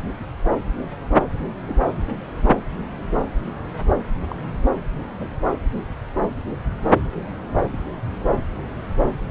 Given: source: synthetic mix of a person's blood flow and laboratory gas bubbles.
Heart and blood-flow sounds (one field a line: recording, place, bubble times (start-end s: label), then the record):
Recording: Doppler ultrasound of blood flow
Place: subclavian vein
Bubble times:
1.66-1.74 s: bubbles
3.12-3.25 s: bubbles
4.31-4.34 s: bubbles
5.19-5.28 s: bubbles
7.60-7.67 s: bubbles
7.71-7.78 s: bubbles
From the record:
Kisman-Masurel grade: 121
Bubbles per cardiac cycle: 1 to 2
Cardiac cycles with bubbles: 10 to 50%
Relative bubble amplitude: barely perceptible (0.100 to 0.250)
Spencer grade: 2 (many but less than half of the cardiac periods contain bubble signals, singularly or in groups)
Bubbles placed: anywhere in the cardiac cycle